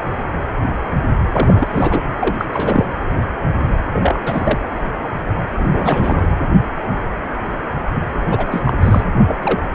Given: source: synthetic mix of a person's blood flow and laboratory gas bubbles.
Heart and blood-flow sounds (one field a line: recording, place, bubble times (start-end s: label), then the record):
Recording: Doppler ultrasound of blood flow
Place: precordium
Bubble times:
1.32-2.06 s: bubbles
2.19-2.45 s: bubbles
2.50-2.86 s: bubbles
3.93-4.15 s: bubbles
4.25-4.58 s: bubbles
5.59-6.27 s: bubbles
7.95-8.04 s: bubbles
8.30-8.46 s: bubbles
8.51-8.73 s: bubbles
8.80-9.04 s: bubbles
9.27-9.37 s: bubbles
9.42-9.62 s: bubbles
From the record:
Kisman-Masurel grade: 332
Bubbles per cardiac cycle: rolling drumbeat, 9 or more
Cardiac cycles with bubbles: 50 to 99%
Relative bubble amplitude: moderate (0.250 to 0.450)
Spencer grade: 3 (all of the cardiac periods contain showers or single bubble signals, but not dominating or overriding the cardiac motion signals)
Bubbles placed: anywhere in the cardiac cycle